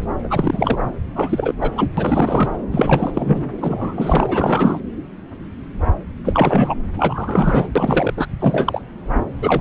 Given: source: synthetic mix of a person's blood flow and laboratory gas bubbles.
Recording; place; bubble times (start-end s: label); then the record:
Doppler ultrasound of blood flow; subclavian vein
0.23-0.76 s: bubbles
1.15-1.54 s: bubbles
1.61-1.71 s: bubbles
1.75-1.88 s: bubbles
1.97-2.52 s: bubbles
2.71-3.50 s: bubbles
3.60-4.80 s: bubbles
6.25-6.75 s: bubbles
6.98-7.69 s: bubbles
7.75-8.13 s: bubbles
8.17-8.26 s: bubbles
8.39-8.82 s: bubbles
9.41-9.61 s: bubbles
From the record:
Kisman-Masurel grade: 333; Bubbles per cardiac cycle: rolling drumbeat, 9 or more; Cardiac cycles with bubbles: 50 to 99%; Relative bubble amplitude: loud (0.450 to 0.775); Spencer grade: 3 (all of the cardiac periods contain showers or single bubble signals, but not dominating or overriding the cardiac motion signals); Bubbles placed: anywhere in the cardiac cycle